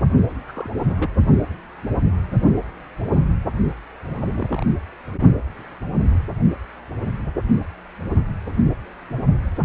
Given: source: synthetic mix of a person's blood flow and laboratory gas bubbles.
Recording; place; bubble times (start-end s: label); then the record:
Doppler ultrasound of blood flow; precordium
0.48-0.70 s: bubbles
0.86-1.10 s: bubbles
4.05-4.65 s: bubbles
From the record:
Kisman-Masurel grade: 221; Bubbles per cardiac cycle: several, 3 to 8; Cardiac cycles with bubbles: 10 to 50%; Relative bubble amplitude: barely perceptible (0.100 to 0.250); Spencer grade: 2 (many but less than half of the cardiac periods contain bubble signals, singularly or in groups); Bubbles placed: only in the low amplitude regions of the cardiac cycle